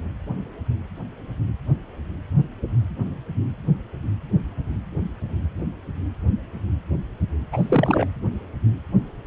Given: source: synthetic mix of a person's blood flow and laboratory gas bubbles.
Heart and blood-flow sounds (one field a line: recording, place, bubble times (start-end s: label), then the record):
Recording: Doppler ultrasound of blood flow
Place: precordium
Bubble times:
7.52-8.06 s: bubbles
From the record:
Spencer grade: 1 (occasional bubble signal discernible with the cardiac motion signal, with majority of cardiac periods free of bubbles)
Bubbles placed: anywhere in the cardiac cycle